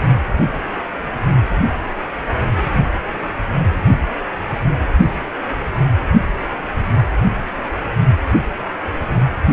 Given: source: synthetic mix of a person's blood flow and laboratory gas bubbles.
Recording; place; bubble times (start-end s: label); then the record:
Doppler ultrasound of blood flow; precordium
no bubbles
From the record:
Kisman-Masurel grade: 000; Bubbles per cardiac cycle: 0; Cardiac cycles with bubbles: 0%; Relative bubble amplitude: no bubbles discernible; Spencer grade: 0 (complete lack of bubble signals)